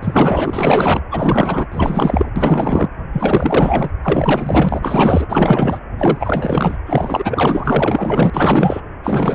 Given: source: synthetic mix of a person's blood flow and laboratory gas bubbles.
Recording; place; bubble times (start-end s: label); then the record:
Doppler ultrasound of blood flow; precordium
0.02-1.01 s: bubbles
1.10-1.66 s: bubbles
1.71-2.31 s: bubbles
2.35-2.88 s: bubbles
3.12-3.90 s: bubbles
4.02-5.26 s: bubbles
5.29-5.79 s: bubbles
5.99-6.77 s: bubbles
6.86-8.30 s: bubbles
8.33-8.81 s: bubbles
9.04-9.35 s: bubbles
From the record:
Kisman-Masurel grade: 444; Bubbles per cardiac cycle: continuous sound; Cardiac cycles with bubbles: 100%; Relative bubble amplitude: maximal (0.775 to 0.999); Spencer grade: 4 (maximum detectable bubble signal sounding continuously throughout systole and diastole of every cardiac period, and overriding the amplitude of the normal cardiac signals); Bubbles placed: anywhere in the cardiac cycle